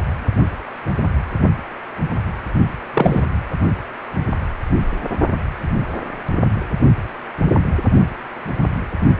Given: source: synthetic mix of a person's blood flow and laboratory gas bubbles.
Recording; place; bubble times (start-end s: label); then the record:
Doppler ultrasound of blood flow; precordium
2.94-3.23 s: bubbles
From the record:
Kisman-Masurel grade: 113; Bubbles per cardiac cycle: 1 to 2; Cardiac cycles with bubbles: 1 to 10%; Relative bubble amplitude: loud (0.450 to 0.775); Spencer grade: 1 (occasional bubble signal discernible with the cardiac motion signal, with majority of cardiac periods free of bubbles); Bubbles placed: only in the low amplitude regions of the cardiac cycle